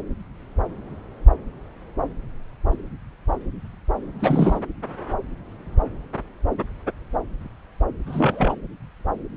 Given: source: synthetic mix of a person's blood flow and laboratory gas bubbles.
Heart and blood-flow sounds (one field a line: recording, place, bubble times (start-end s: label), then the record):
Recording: Doppler ultrasound of blood flow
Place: subclavian vein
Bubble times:
4.19-4.60 s: bubbles
8.06-8.55 s: bubbles
From the record:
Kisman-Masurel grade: 212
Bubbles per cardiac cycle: several, 3 to 8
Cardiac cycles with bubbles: 1 to 10%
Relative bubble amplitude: moderate (0.250 to 0.450)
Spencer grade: 1 (occasional bubble signal discernible with the cardiac motion signal, with majority of cardiac periods free of bubbles)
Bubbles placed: anywhere in the cardiac cycle